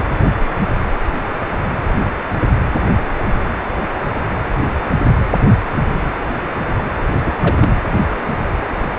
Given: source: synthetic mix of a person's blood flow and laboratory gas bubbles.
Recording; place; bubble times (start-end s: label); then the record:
Doppler ultrasound of blood flow; precordium
7.25-7.35 s: bubbles
7.41-7.55 s: bubbles
7.59-7.71 s: bubbles
From the record:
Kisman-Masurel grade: 212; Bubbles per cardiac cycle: several, 3 to 8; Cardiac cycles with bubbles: 1 to 10%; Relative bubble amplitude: moderate (0.250 to 0.450); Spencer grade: 1 (occasional bubble signal discernible with the cardiac motion signal, with majority of cardiac periods free of bubbles); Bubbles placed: anywhere in the cardiac cycle